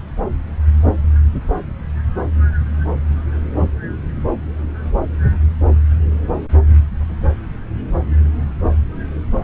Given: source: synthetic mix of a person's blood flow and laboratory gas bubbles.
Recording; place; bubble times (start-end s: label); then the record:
Doppler ultrasound of blood flow; subclavian vein
no bubbles
From the record:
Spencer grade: 0 (complete lack of bubble signals)